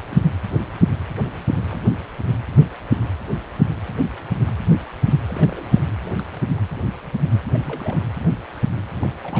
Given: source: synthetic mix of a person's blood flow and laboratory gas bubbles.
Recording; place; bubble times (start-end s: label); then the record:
Doppler ultrasound of blood flow; precordium
0.00-0.07 s: bubbles
0.10-0.27 s: bubbles
1.50-1.81 s: bubbles
5.29-5.79 s: bubbles
6.05-6.09 s: bubbles
6.18-6.21 s: bubbles
6.57-6.61 s: bubbles
7.50-8.05 s: bubbles
9.01-9.09 s: bubbles
9.23-9.40 s: bubbles
From the record:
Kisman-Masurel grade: 221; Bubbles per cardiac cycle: several, 3 to 8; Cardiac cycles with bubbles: 10 to 50%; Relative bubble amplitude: barely perceptible (0.100 to 0.250); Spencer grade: 2 (many but less than half of the cardiac periods contain bubble signals, singularly or in groups); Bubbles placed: anywhere in the cardiac cycle